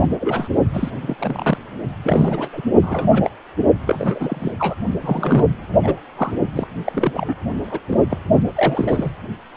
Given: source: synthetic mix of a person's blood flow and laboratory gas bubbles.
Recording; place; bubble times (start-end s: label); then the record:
Doppler ultrasound of blood flow; precordium
0.10-0.16 s: bubbles
0.20-0.48 s: bubbles
0.73-0.91 s: bubbles
1.01-1.16 s: bubbles
1.19-1.57 s: bubbles
2.02-2.49 s: bubbles
2.53-2.62 s: bubbles
2.81-3.33 s: bubbles
3.87-4.52 s: bubbles
4.59-4.75 s: bubbles
5.01-5.45 s: bubbles
5.83-6.00 s: bubbles
6.16-6.32 s: bubbles
6.55-6.67 s: bubbles
6.85-7.34 s: bubbles
7.67-7.79 s: bubbles
7.90-7.97 s: bubbles
8.10-8.18 s: bubbles
8.55-9.09 s: bubbles
From the record:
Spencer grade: 3 (all of the cardiac periods contain showers or single bubble signals, but not dominating or overriding the cardiac motion signals); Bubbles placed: only in the low amplitude regions of the cardiac cycle